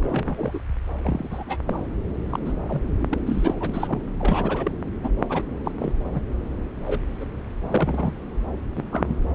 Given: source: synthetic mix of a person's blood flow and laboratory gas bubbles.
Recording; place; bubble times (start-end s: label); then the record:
Doppler ultrasound of blood flow; subclavian vein
0.03-0.59 s: bubbles
1.02-1.44 s: bubbles
1.46-1.57 s: bubbles
1.66-1.81 s: bubbles
2.29-2.40 s: bubbles
2.45-2.53 s: bubbles
2.69-2.82 s: bubbles
3.00-3.19 s: bubbles
3.25-3.53 s: bubbles
3.56-4.00 s: bubbles
4.19-4.71 s: bubbles
5.03-5.10 s: bubbles
5.19-5.24 s: bubbles
5.29-5.43 s: bubbles
5.64-5.71 s: bubbles
5.79-5.92 s: bubbles
6.12-6.22 s: bubbles
6.86-7.00 s: bubbles
7.20-7.26 s: bubbles
7.61-8.11 s: bubbles
8.77-8.83 s: bubbles
8.92-9.16 s: bubbles
From the record:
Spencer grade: 3 (all of the cardiac periods contain showers or single bubble signals, but not dominating or overriding the cardiac motion signals); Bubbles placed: anywhere in the cardiac cycle